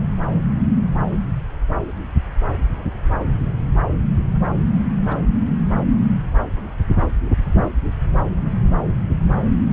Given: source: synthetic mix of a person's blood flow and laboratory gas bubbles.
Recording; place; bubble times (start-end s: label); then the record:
Doppler ultrasound of blood flow; subclavian vein
5.07-5.21 s: bubbles
From the record:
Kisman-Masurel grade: 111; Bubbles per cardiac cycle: 1 to 2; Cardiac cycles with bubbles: 1 to 10%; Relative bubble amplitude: barely perceptible (0.100 to 0.250); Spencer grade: 1 (occasional bubble signal discernible with the cardiac motion signal, with majority of cardiac periods free of bubbles); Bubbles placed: anywhere in the cardiac cycle